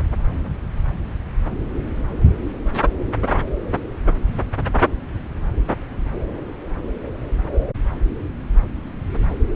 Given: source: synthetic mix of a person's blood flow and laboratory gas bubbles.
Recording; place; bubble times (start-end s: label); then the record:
Doppler ultrasound of blood flow; subclavian vein
no bubbles
From the record:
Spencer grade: 0 (complete lack of bubble signals)